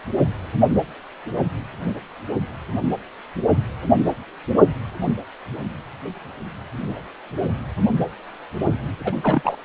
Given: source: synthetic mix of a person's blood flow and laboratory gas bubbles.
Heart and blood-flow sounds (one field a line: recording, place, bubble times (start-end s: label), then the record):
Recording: Doppler ultrasound of blood flow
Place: precordium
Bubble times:
9.04-9.16 s: bubbles
9.22-9.62 s: bubbles
From the record:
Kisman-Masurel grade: 212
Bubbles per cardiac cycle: several, 3 to 8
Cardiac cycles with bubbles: 1 to 10%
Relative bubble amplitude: moderate (0.250 to 0.450)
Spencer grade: 1 (occasional bubble signal discernible with the cardiac motion signal, with majority of cardiac periods free of bubbles)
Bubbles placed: only in the low amplitude regions of the cardiac cycle